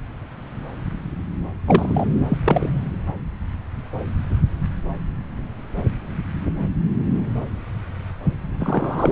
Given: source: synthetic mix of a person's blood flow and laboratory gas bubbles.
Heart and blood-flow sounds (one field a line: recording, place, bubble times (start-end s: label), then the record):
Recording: Doppler ultrasound of blood flow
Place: subclavian vein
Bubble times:
1.66-2.05 s: bubbles
2.28-2.38 s: bubbles
2.44-2.70 s: bubbles
8.59-9.12 s: bubbles
From the record:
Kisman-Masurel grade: 223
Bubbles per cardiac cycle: several, 3 to 8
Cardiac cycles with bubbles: 10 to 50%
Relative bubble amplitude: loud (0.450 to 0.775)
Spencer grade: 2 (many but less than half of the cardiac periods contain bubble signals, singularly or in groups)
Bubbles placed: anywhere in the cardiac cycle